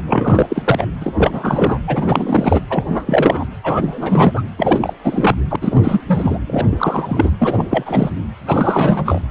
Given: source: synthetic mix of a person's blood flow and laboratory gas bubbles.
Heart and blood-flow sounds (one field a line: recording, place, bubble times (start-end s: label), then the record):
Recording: Doppler ultrasound of blood flow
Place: precordium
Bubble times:
0.06-0.47 s: bubbles
0.50-0.85 s: bubbles
1.01-1.14 s: bubbles
1.18-1.80 s: bubbles
1.87-2.61 s: bubbles
2.70-3.45 s: bubbles
3.64-4.42 s: bubbles
4.57-4.94 s: bubbles
5.04-5.36 s: bubbles
5.50-5.56 s: bubbles
5.61-6.01 s: bubbles
6.08-6.38 s: bubbles
6.46-6.67 s: bubbles
6.71-7.31 s: bubbles
7.39-7.65 s: bubbles
7.70-8.10 s: bubbles
8.46-9.21 s: bubbles
From the record:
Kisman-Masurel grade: 343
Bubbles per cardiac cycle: rolling drumbeat, 9 or more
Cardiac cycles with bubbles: 100%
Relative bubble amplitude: loud (0.450 to 0.775)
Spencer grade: 3 (all of the cardiac periods contain showers or single bubble signals, but not dominating or overriding the cardiac motion signals)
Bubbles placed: anywhere in the cardiac cycle